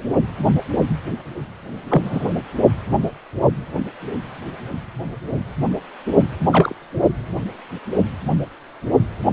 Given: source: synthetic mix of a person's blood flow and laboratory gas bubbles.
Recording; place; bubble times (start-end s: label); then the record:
Doppler ultrasound of blood flow; precordium
1.88-2.33 s: bubbles
6.50-6.75 s: bubbles
From the record:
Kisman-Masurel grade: 122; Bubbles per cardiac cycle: 1 to 2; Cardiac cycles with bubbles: 10 to 50%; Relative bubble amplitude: moderate (0.250 to 0.450); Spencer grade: 2 (many but less than half of the cardiac periods contain bubble signals, singularly or in groups); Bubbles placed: only in the low amplitude regions of the cardiac cycle